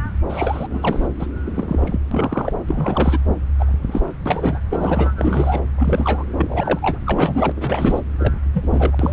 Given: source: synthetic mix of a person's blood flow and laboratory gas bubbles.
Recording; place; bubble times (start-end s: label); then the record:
Doppler ultrasound of blood flow; subclavian vein
0.29-0.67 s: bubbles
0.69-1.08 s: bubbles
1.19-1.26 s: bubbles
1.43-1.98 s: bubbles
2.11-2.52 s: bubbles
2.69-3.19 s: bubbles
3.59-4.08 s: bubbles
4.25-4.59 s: bubbles
4.70-5.11 s: bubbles
5.17-5.60 s: bubbles
5.77-6.23 s: bubbles
6.37-6.98 s: bubbles
7.06-7.51 s: bubbles
7.55-8.00 s: bubbles
8.19-8.33 s: bubbles
8.54-9.13 s: bubbles
From the record:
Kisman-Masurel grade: 242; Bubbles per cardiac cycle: several, 3 to 8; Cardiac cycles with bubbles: 100%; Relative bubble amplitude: moderate (0.250 to 0.450); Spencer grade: 3 (all of the cardiac periods contain showers or single bubble signals, but not dominating or overriding the cardiac motion signals); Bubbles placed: anywhere in the cardiac cycle